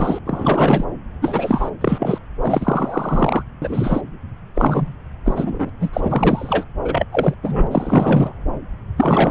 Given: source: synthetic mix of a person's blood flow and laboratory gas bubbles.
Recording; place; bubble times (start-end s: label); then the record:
Doppler ultrasound of blood flow; subclavian vein
0.00-0.19 s: bubbles
0.25-0.85 s: bubbles
1.21-1.70 s: bubbles
1.81-2.19 s: bubbles
2.41-3.43 s: bubbles
3.62-4.01 s: bubbles
4.55-4.93 s: bubbles
5.25-5.70 s: bubbles
5.80-5.90 s: bubbles
5.93-6.65 s: bubbles
6.84-7.07 s: bubbles
7.12-7.34 s: bubbles
7.42-7.67 s: bubbles
7.71-8.32 s: bubbles
8.97-9.31 s: bubbles
From the record:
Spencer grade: 3 (all of the cardiac periods contain showers or single bubble signals, but not dominating or overriding the cardiac motion signals); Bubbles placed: anywhere in the cardiac cycle